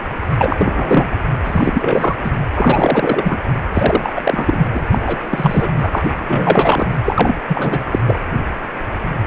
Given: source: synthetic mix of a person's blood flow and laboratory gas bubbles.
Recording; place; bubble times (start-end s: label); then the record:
Doppler ultrasound of blood flow; precordium
0.21-0.27 s: bubbles
0.30-1.17 s: bubbles
1.44-2.17 s: bubbles
2.22-2.32 s: bubbles
2.54-3.38 s: bubbles
3.73-4.21 s: bubbles
4.23-4.67 s: bubbles
4.73-4.86 s: bubbles
4.90-4.98 s: bubbles
5.02-5.69 s: bubbles
5.76-6.11 s: bubbles
6.26-6.88 s: bubbles
7.04-7.33 s: bubbles
7.47-7.81 s: bubbles
7.91-7.99 s: bubbles
8.07-8.16 s: bubbles
From the record:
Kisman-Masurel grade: 333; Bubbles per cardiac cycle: rolling drumbeat, 9 or more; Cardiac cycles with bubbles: 50 to 99%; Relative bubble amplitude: loud (0.450 to 0.775); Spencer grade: 3 (all of the cardiac periods contain showers or single bubble signals, but not dominating or overriding the cardiac motion signals); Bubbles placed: anywhere in the cardiac cycle